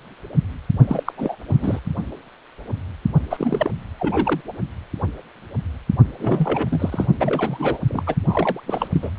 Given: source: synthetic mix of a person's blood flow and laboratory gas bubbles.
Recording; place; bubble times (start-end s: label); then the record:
Doppler ultrasound of blood flow; precordium
0.88-1.12 s: bubbles
1.17-1.36 s: bubbles
1.48-1.79 s: bubbles
3.30-3.71 s: bubbles
3.99-4.41 s: bubbles
4.47-4.53 s: bubbles
6.20-7.05 s: bubbles
7.19-7.79 s: bubbles
7.88-8.03 s: bubbles
8.06-8.14 s: bubbles
8.29-8.61 s: bubbles
8.67-8.88 s: bubbles
8.92-9.10 s: bubbles
From the record:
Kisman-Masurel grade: 332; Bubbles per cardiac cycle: rolling drumbeat, 9 or more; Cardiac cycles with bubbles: 50 to 99%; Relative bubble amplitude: moderate (0.250 to 0.450); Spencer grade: 3 (all of the cardiac periods contain showers or single bubble signals, but not dominating or overriding the cardiac motion signals); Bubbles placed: only in the low amplitude regions of the cardiac cycle